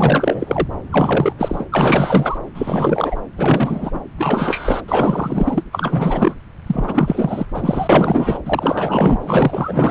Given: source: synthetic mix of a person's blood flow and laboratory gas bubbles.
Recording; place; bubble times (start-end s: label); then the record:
Doppler ultrasound of blood flow; subclavian vein
0.00-0.67 s: bubbles
0.91-1.32 s: bubbles
1.38-1.68 s: bubbles
1.71-2.38 s: bubbles
2.54-3.16 s: bubbles
3.37-4.00 s: bubbles
4.17-4.81 s: bubbles
4.88-5.63 s: bubbles
5.71-6.34 s: bubbles
6.66-7.46 s: bubbles
7.54-8.39 s: bubbles
8.45-9.91 s: bubbles
From the record:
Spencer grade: 4 (maximum detectable bubble signal sounding continuously throughout systole and diastole of every cardiac period, and overriding the amplitude of the normal cardiac signals); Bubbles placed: anywhere in the cardiac cycle